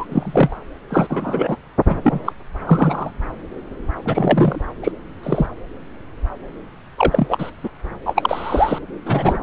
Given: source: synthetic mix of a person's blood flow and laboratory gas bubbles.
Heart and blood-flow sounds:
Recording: Doppler ultrasound of blood flow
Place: subclavian vein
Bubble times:
0.00-0.05 s: bubbles
0.12-0.57 s: bubbles
0.90-1.56 s: bubbles
1.88-1.96 s: bubbles
2.02-2.20 s: bubbles
2.25-2.33 s: bubbles
2.66-3.11 s: bubbles
4.04-4.62 s: bubbles
4.83-4.92 s: bubbles
5.23-5.46 s: bubbles
6.98-7.50 s: bubbles
7.63-7.70 s: bubbles
8.05-8.78 s: bubbles
9.05-9.38 s: bubbles
From the record:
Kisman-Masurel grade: 233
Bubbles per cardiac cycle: several, 3 to 8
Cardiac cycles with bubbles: 50 to 99%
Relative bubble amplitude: loud (0.450 to 0.775)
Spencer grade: 3 (all of the cardiac periods contain showers or single bubble signals, but not dominating or overriding the cardiac motion signals)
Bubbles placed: anywhere in the cardiac cycle

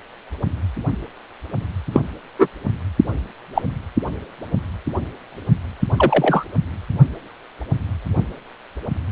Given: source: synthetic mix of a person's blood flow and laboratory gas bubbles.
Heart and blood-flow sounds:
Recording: Doppler ultrasound of blood flow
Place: precordium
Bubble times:
1.92-2.01 s: bubbles
2.39-2.48 s: bubbles
3.54-3.62 s: bubbles
5.97-6.45 s: bubbles
From the record:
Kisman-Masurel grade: 123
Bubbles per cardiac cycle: 1 to 2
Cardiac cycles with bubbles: 10 to 50%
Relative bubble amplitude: loud (0.450 to 0.775)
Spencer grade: 2 (many but less than half of the cardiac periods contain bubble signals, singularly or in groups)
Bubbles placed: only in the low amplitude regions of the cardiac cycle

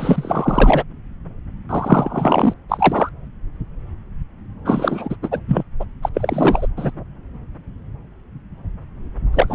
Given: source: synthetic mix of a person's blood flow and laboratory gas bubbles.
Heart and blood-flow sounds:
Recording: Doppler ultrasound of blood flow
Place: subclavian vein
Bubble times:
0.00-0.83 s: bubbles
1.69-2.54 s: bubbles
2.69-3.10 s: bubbles
4.65-5.16 s: bubbles
5.22-5.40 s: bubbles
5.47-5.63 s: bubbles
5.79-5.85 s: bubbles
6.02-6.09 s: bubbles
6.14-6.67 s: bubbles
6.76-6.91 s: bubbles
9.32-9.55 s: bubbles
From the record:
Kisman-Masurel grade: 333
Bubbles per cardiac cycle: rolling drumbeat, 9 or more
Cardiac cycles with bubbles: 50 to 99%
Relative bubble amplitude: loud (0.450 to 0.775)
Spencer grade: 3 (all of the cardiac periods contain showers or single bubble signals, but not dominating or overriding the cardiac motion signals)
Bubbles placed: anywhere in the cardiac cycle

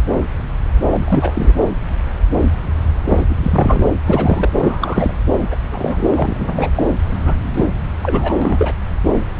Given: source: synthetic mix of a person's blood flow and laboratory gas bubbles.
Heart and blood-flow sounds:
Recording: Doppler ultrasound of blood flow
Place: subclavian vein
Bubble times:
0.90-1.52 s: bubbles
3.08-3.25 s: bubbles
3.29-3.35 s: bubbles
3.43-3.83 s: bubbles
4.05-4.50 s: bubbles
4.59-5.20 s: bubbles
5.51-5.55 s: bubbles
5.71-6.71 s: bubbles
6.75-6.83 s: bubbles
7.23-7.34 s: bubbles
7.54-7.65 s: bubbles
8.03-8.34 s: bubbles
8.42-8.74 s: bubbles
From the record:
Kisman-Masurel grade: 332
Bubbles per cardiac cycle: rolling drumbeat, 9 or more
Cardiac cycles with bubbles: 50 to 99%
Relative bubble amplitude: moderate (0.250 to 0.450)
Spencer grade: 3 (all of the cardiac periods contain showers or single bubble signals, but not dominating or overriding the cardiac motion signals)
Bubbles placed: anywhere in the cardiac cycle

